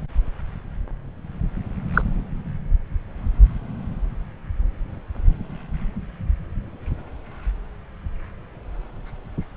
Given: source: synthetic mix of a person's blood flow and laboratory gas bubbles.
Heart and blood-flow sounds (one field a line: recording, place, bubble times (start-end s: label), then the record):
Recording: Doppler ultrasound of blood flow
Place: subclavian vein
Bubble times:
1.93-2.02 s: bubbles
From the record:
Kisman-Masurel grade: 113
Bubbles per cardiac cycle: 1 to 2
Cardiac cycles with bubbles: 1 to 10%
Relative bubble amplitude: loud (0.450 to 0.775)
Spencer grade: 1 (occasional bubble signal discernible with the cardiac motion signal, with majority of cardiac periods free of bubbles)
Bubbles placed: anywhere in the cardiac cycle